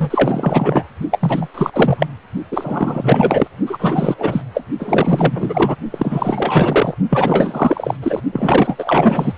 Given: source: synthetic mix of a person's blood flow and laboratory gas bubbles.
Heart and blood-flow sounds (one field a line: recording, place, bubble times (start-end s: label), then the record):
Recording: Doppler ultrasound of blood flow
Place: precordium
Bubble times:
0.00-0.90 s: bubbles
1.11-1.49 s: bubbles
1.54-1.70 s: bubbles
1.73-2.06 s: bubbles
2.51-3.48 s: bubbles
3.66-4.42 s: bubbles
4.54-4.63 s: bubbles
4.79-5.76 s: bubbles
5.90-6.94 s: bubbles
7.09-7.96 s: bubbles
8.03-8.21 s: bubbles
8.32-9.34 s: bubbles
From the record:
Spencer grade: 4 (maximum detectable bubble signal sounding continuously throughout systole and diastole of every cardiac period, and overriding the amplitude of the normal cardiac signals)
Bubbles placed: only in the low amplitude regions of the cardiac cycle